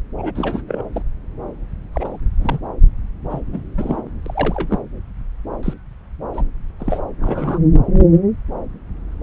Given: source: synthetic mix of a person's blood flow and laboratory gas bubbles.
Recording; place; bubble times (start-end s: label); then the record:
Doppler ultrasound of blood flow; subclavian vein
0.18-0.32 s: bubbles
0.35-0.61 s: bubbles
0.67-0.83 s: bubbles
0.93-1.02 s: bubbles
1.92-2.21 s: bubbles
2.40-2.59 s: bubbles
3.29-3.40 s: bubbles
3.52-3.61 s: bubbles
3.77-4.02 s: bubbles
4.22-4.79 s: bubbles
5.62-5.73 s: bubbles
6.33-6.45 s: bubbles
6.79-7.00 s: bubbles
7.20-7.59 s: bubbles
From the record:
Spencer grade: 3 (all of the cardiac periods contain showers or single bubble signals, but not dominating or overriding the cardiac motion signals); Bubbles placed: anywhere in the cardiac cycle